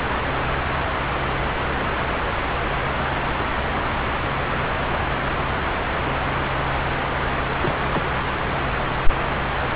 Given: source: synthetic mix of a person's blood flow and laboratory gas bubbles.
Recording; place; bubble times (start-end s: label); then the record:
Doppler ultrasound of blood flow; subclavian vein
7.62-7.75 s: bubbles
7.92-8.04 s: bubbles
8.62-8.67 s: bubbles
From the record:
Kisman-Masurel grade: 121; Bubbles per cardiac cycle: 1 to 2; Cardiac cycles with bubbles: 10 to 50%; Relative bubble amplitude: barely perceptible (0.100 to 0.250); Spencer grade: 2 (many but less than half of the cardiac periods contain bubble signals, singularly or in groups); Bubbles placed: anywhere in the cardiac cycle